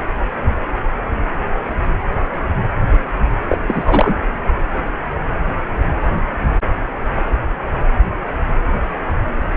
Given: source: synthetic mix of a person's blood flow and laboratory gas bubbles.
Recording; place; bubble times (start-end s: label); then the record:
Doppler ultrasound of blood flow; precordium
3.49-3.58 s: bubbles
3.67-4.14 s: bubbles
From the record:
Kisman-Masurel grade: 213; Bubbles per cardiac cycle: several, 3 to 8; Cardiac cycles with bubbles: 1 to 10%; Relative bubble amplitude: loud (0.450 to 0.775); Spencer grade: 1 (occasional bubble signal discernible with the cardiac motion signal, with majority of cardiac periods free of bubbles); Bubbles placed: anywhere in the cardiac cycle